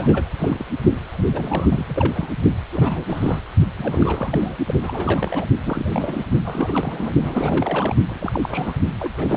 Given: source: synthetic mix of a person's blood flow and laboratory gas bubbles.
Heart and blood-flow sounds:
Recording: Doppler ultrasound of blood flow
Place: precordium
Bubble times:
0.00-0.34 s: bubbles
0.38-0.66 s: bubbles
1.12-1.24 s: bubbles
1.32-2.34 s: bubbles
2.72-3.40 s: bubbles
3.77-4.57 s: bubbles
4.67-4.75 s: bubbles
4.79-5.46 s: bubbles
5.65-6.26 s: bubbles
6.45-7.12 s: bubbles
7.20-7.95 s: bubbles
8.08-8.73 s: bubbles
8.99-9.13 s: bubbles
9.16-9.37 s: bubbles
From the record:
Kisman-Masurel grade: 342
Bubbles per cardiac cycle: rolling drumbeat, 9 or more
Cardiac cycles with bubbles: 100%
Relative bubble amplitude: moderate (0.250 to 0.450)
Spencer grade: 3 (all of the cardiac periods contain showers or single bubble signals, but not dominating or overriding the cardiac motion signals)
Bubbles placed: only in the low amplitude regions of the cardiac cycle

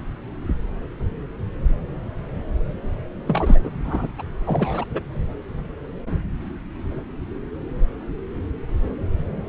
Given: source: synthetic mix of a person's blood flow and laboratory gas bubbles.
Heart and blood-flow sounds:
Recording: Doppler ultrasound of blood flow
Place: subclavian vein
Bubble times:
3.27-3.60 s: bubbles
3.64-3.71 s: bubbles
3.84-4.08 s: bubbles
4.18-4.22 s: bubbles
4.44-4.85 s: bubbles
4.91-5.00 s: bubbles
From the record:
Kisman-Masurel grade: 222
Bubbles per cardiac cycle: several, 3 to 8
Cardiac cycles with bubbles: 10 to 50%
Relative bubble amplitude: moderate (0.250 to 0.450)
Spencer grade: 2 (many but less than half of the cardiac periods contain bubble signals, singularly or in groups)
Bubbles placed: anywhere in the cardiac cycle

